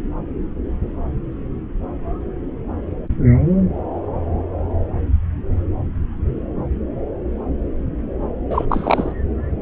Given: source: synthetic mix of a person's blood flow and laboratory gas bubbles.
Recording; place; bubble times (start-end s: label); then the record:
Doppler ultrasound of blood flow; subclavian vein
8.50-8.65 s: bubbles
8.69-9.12 s: bubbles
From the record:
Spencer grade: 1 (occasional bubble signal discernible with the cardiac motion signal, with majority of cardiac periods free of bubbles); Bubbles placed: anywhere in the cardiac cycle